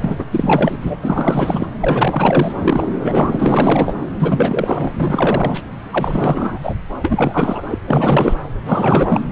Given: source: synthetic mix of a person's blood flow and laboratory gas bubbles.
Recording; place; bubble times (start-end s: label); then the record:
Doppler ultrasound of blood flow; subclavian vein
0.00-0.25 s: bubbles
0.30-0.77 s: bubbles
0.80-0.97 s: bubbles
1.02-1.67 s: bubbles
1.80-2.52 s: bubbles
2.61-2.88 s: bubbles
3.02-3.96 s: bubbles
4.19-4.92 s: bubbles
4.96-5.62 s: bubbles
5.89-6.60 s: bubbles
6.63-6.75 s: bubbles
7.02-7.64 s: bubbles
7.68-7.78 s: bubbles
7.86-8.36 s: bubbles
8.66-9.24 s: bubbles
From the record:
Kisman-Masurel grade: 444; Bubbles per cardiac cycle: continuous sound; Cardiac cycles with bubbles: 100%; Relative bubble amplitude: maximal (0.775 to 0.999); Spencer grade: 4 (maximum detectable bubble signal sounding continuously throughout systole and diastole of every cardiac period, and overriding the amplitude of the normal cardiac signals); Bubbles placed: anywhere in the cardiac cycle